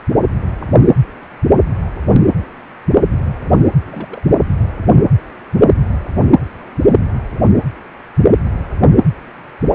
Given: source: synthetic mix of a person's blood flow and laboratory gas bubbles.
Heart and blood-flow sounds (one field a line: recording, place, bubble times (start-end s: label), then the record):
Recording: Doppler ultrasound of blood flow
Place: precordium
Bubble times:
3.84-4.39 s: bubbles
From the record:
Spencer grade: 1 (occasional bubble signal discernible with the cardiac motion signal, with majority of cardiac periods free of bubbles)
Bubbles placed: anywhere in the cardiac cycle